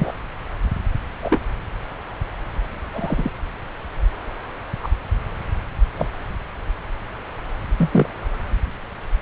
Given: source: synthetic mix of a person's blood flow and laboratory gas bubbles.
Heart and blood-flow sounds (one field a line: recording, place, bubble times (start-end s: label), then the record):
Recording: Doppler ultrasound of blood flow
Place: subclavian vein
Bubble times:
0.00-0.12 s: bubbles
1.22-1.39 s: bubbles
2.93-3.30 s: bubbles
4.83-4.88 s: bubbles
5.96-6.06 s: bubbles
7.78-7.90 s: bubbles
7.92-8.07 s: bubbles
From the record:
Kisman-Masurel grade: 122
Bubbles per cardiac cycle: 1 to 2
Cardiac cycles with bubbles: 10 to 50%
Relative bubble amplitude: moderate (0.250 to 0.450)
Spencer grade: 2 (many but less than half of the cardiac periods contain bubble signals, singularly or in groups)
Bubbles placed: anywhere in the cardiac cycle